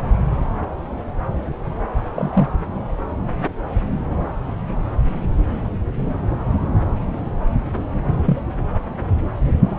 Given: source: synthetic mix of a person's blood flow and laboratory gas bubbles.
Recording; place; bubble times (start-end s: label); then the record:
Doppler ultrasound of blood flow; subclavian vein
2.16-2.48 s: bubbles
8.26-8.37 s: bubbles
From the record:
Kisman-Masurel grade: 123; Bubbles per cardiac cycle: 1 to 2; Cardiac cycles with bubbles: 10 to 50%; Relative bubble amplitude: loud (0.450 to 0.775); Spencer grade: 2 (many but less than half of the cardiac periods contain bubble signals, singularly or in groups); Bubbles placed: anywhere in the cardiac cycle